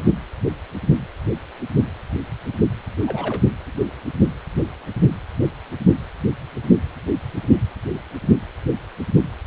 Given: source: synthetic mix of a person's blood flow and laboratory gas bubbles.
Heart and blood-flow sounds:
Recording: Doppler ultrasound of blood flow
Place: precordium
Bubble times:
3.06-3.41 s: bubbles
From the record:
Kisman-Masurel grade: 122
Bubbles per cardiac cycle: 1 to 2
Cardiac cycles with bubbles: 10 to 50%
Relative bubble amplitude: moderate (0.250 to 0.450)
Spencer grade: 2 (many but less than half of the cardiac periods contain bubble signals, singularly or in groups)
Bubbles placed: anywhere in the cardiac cycle

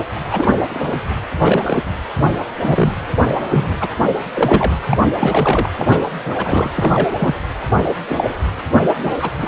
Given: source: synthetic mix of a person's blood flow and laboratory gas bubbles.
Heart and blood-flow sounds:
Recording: Doppler ultrasound of blood flow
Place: precordium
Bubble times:
0.31-0.48 s: bubbles
0.68-1.00 s: bubbles
1.42-1.83 s: bubbles
2.60-2.93 s: bubbles
3.26-3.36 s: bubbles
3.50-3.76 s: bubbles
3.80-3.89 s: bubbles
4.33-4.76 s: bubbles
4.87-4.97 s: bubbles
5.19-5.70 s: bubbles
5.78-5.87 s: bubbles
5.89-6.00 s: bubbles
6.24-6.35 s: bubbles
6.38-6.70 s: bubbles
6.76-7.09 s: bubbles
7.18-7.35 s: bubbles
7.75-7.84 s: bubbles
8.08-8.34 s: bubbles
9.03-9.12 s: bubbles
9.19-9.30 s: bubbles
9.38-9.48 s: bubbles
From the record:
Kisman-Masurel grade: 242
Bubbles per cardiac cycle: several, 3 to 8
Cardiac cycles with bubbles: 100%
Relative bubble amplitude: moderate (0.250 to 0.450)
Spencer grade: 3 (all of the cardiac periods contain showers or single bubble signals, but not dominating or overriding the cardiac motion signals)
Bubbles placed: anywhere in the cardiac cycle

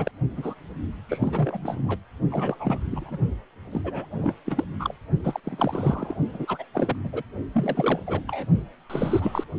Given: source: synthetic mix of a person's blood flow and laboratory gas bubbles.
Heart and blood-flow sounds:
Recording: Doppler ultrasound of blood flow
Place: precordium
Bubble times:
0.00-0.11 s: bubbles
0.36-0.54 s: bubbles
1.09-1.99 s: bubbles
2.30-2.79 s: bubbles
2.91-3.18 s: bubbles
3.71-3.81 s: bubbles
3.84-4.33 s: bubbles
4.46-4.64 s: bubbles
4.79-4.94 s: bubbles
5.24-5.40 s: bubbles
5.43-6.17 s: bubbles
6.33-6.66 s: bubbles
6.74-6.96 s: bubbles
7.04-7.22 s: bubbles
7.53-8.00 s: bubbles
8.07-8.21 s: bubbles
8.27-8.46 s: bubbles
8.90-9.44 s: bubbles
From the record:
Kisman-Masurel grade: 342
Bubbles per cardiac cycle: rolling drumbeat, 9 or more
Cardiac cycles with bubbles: 100%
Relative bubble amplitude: moderate (0.250 to 0.450)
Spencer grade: 3 (all of the cardiac periods contain showers or single bubble signals, but not dominating or overriding the cardiac motion signals)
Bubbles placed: only in the low amplitude regions of the cardiac cycle

